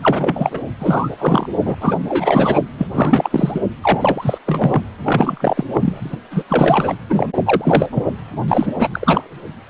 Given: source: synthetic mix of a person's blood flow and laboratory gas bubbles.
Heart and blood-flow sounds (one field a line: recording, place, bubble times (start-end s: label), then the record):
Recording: Doppler ultrasound of blood flow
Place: precordium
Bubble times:
0.02-0.60 s: bubbles
0.80-1.48 s: bubbles
1.65-1.75 s: bubbles
1.81-1.96 s: bubbles
2.08-2.60 s: bubbles
2.78-2.87 s: bubbles
2.93-3.60 s: bubbles
3.83-4.38 s: bubbles
4.46-4.82 s: bubbles
5.05-5.65 s: bubbles
5.73-6.16 s: bubbles
6.30-6.44 s: bubbles
6.49-6.96 s: bubbles
7.09-7.27 s: bubbles
7.45-7.86 s: bubbles
7.92-8.13 s: bubbles
8.47-8.72 s: bubbles
8.78-8.88 s: bubbles
8.93-9.30 s: bubbles
From the record:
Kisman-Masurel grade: 343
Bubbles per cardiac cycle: rolling drumbeat, 9 or more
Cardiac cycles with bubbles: 100%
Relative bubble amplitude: loud (0.450 to 0.775)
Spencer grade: 3 (all of the cardiac periods contain showers or single bubble signals, but not dominating or overriding the cardiac motion signals)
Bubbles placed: anywhere in the cardiac cycle